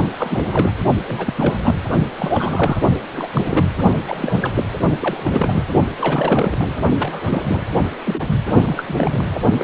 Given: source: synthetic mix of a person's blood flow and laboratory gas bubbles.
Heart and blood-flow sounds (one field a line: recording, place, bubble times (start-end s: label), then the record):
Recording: Doppler ultrasound of blood flow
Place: precordium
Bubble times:
0.18-0.72 s: bubbles
1.06-1.59 s: bubbles
1.63-1.75 s: bubbles
2.18-2.81 s: bubbles
3.12-3.29 s: bubbles
3.33-3.65 s: bubbles
4.08-4.64 s: bubbles
5.00-5.64 s: bubbles
5.97-6.76 s: bubbles
6.98-7.67 s: bubbles
8.04-8.28 s: bubbles
8.64-8.86 s: bubbles
8.88-8.95 s: bubbles
8.97-9.40 s: bubbles
9.59-9.64 s: bubbles
From the record:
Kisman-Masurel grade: 342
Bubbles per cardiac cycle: rolling drumbeat, 9 or more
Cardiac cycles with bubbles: 100%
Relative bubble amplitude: moderate (0.250 to 0.450)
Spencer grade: 3 (all of the cardiac periods contain showers or single bubble signals, but not dominating or overriding the cardiac motion signals)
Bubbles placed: only in the low amplitude regions of the cardiac cycle